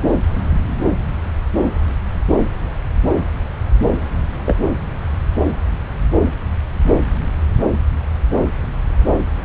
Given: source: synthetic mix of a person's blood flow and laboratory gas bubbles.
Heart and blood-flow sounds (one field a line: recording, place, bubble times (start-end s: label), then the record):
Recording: Doppler ultrasound of blood flow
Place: subclavian vein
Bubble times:
4.46-4.54 s: bubbles
From the record:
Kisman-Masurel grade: 113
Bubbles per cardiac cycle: 1 to 2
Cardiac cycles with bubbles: 1 to 10%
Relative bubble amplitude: loud (0.450 to 0.775)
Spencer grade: 1 (occasional bubble signal discernible with the cardiac motion signal, with majority of cardiac periods free of bubbles)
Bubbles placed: anywhere in the cardiac cycle